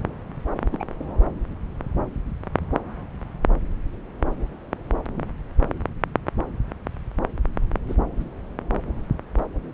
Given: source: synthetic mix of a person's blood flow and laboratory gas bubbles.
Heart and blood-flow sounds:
Doppler ultrasound of blood flow; subclavian vein
0.72-0.84 s: bubbles
7.89-7.94 s: bubbles
8.17-8.24 s: bubbles
From the record:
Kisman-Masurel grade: 121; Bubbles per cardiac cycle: 1 to 2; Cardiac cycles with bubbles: 10 to 50%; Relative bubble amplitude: barely perceptible (0.100 to 0.250); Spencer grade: 2 (many but less than half of the cardiac periods contain bubble signals, singularly or in groups); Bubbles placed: anywhere in the cardiac cycle

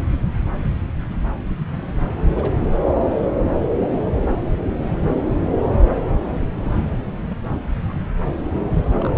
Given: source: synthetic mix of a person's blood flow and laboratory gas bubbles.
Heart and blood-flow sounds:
Doppler ultrasound of blood flow; subclavian vein
2.35-2.51 s: bubbles
2.67-2.74 s: bubbles
6.31-6.38 s: bubbles
6.40-6.92 s: bubbles
7.30-7.38 s: bubbles
7.89-7.96 s: bubbles
8.38-8.47 s: bubbles
9.01-9.13 s: bubbles
From the record:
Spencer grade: 2 (many but less than half of the cardiac periods contain bubble signals, singularly or in groups); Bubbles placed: anywhere in the cardiac cycle

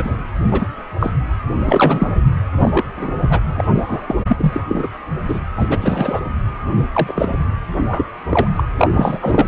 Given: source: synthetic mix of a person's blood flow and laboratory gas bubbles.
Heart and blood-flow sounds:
Doppler ultrasound of blood flow; precordium
0.00-0.16 s: bubbles
0.51-0.66 s: bubbles
0.99-1.10 s: bubbles
1.65-2.10 s: bubbles
2.60-2.85 s: bubbles
2.96-3.14 s: bubbles
3.29-3.41 s: bubbles
3.56-3.67 s: bubbles
3.74-4.14 s: bubbles
4.27-4.63 s: bubbles
4.68-4.88 s: bubbles
5.28-5.40 s: bubbles
5.56-5.67 s: bubbles
5.70-5.78 s: bubbles
5.81-6.20 s: bubbles
6.93-7.38 s: bubbles
7.72-8.05 s: bubbles
8.29-8.48 s: bubbles
8.55-8.63 s: bubbles
8.78-9.19 s: bubbles
9.21-9.46 s: bubbles
From the record:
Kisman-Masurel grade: 243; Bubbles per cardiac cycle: several, 3 to 8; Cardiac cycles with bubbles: 100%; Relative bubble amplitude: loud (0.450 to 0.775); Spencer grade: 3 (all of the cardiac periods contain showers or single bubble signals, but not dominating or overriding the cardiac motion signals); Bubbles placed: anywhere in the cardiac cycle

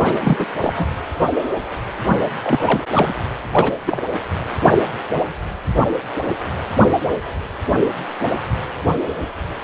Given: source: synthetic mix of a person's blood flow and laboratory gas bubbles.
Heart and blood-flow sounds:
Doppler ultrasound of blood flow; precordium
0.00-0.46 s: bubbles
0.60-0.73 s: bubbles
0.75-0.88 s: bubbles
2.43-2.83 s: bubbles
2.93-3.15 s: bubbles
3.51-3.73 s: bubbles
3.87-4.00 s: bubbles
From the record:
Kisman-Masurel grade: 222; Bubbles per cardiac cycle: several, 3 to 8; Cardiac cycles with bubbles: 10 to 50%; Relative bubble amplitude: moderate (0.250 to 0.450); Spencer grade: 2 (many but less than half of the cardiac periods contain bubble signals, singularly or in groups); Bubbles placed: anywhere in the cardiac cycle

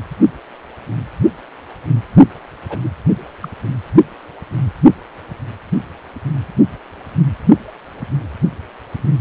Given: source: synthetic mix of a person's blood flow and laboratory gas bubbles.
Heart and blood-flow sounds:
Doppler ultrasound of blood flow; precordium
2.69-2.79 s: bubbles
2.82-2.90 s: bubbles
3.42-3.49 s: bubbles
From the record:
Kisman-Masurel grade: 222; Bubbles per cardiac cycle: several, 3 to 8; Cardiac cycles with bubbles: 10 to 50%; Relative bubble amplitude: moderate (0.250 to 0.450); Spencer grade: 2 (many but less than half of the cardiac periods contain bubble signals, singularly or in groups); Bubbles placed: only in the low amplitude regions of the cardiac cycle

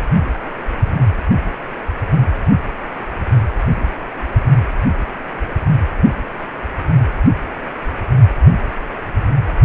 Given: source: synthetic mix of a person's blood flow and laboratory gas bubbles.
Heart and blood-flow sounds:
Doppler ultrasound of blood flow; precordium
no bubbles
From the record:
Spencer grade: 0 (complete lack of bubble signals)

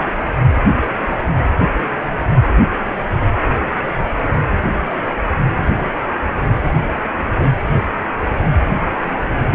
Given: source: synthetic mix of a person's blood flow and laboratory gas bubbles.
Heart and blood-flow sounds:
Doppler ultrasound of blood flow; precordium
9.50-9.55 s: bubbles
From the record:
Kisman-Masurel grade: 123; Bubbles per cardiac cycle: 1 to 2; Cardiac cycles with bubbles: 10 to 50%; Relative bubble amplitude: loud (0.450 to 0.775); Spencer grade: 2 (many but less than half of the cardiac periods contain bubble signals, singularly or in groups); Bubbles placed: anywhere in the cardiac cycle

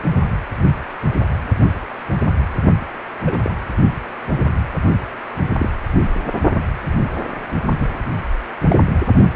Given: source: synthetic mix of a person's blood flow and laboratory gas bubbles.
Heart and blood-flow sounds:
Doppler ultrasound of blood flow; precordium
3.25-3.40 s: bubbles
3.44-3.53 s: bubbles
4.36-4.44 s: bubbles
5.58-5.69 s: bubbles
7.80-7.86 s: bubbles
8.70-8.76 s: bubbles
From the record:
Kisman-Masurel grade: 122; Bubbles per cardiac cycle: 1 to 2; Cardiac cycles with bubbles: 10 to 50%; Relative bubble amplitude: moderate (0.250 to 0.450); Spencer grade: 2 (many but less than half of the cardiac periods contain bubble signals, singularly or in groups); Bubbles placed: only in the low amplitude regions of the cardiac cycle

